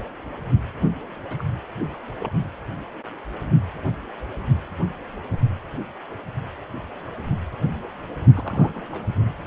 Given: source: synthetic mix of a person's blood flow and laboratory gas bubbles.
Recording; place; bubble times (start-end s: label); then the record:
Doppler ultrasound of blood flow; precordium
1.29-1.44 s: bubbles
1.83-1.98 s: bubbles
2.19-2.33 s: bubbles
8.34-9.06 s: bubbles
From the record:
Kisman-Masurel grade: 221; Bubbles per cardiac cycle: several, 3 to 8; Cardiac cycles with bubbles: 10 to 50%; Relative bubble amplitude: barely perceptible (0.100 to 0.250); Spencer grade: 2 (many but less than half of the cardiac periods contain bubble signals, singularly or in groups); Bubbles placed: anywhere in the cardiac cycle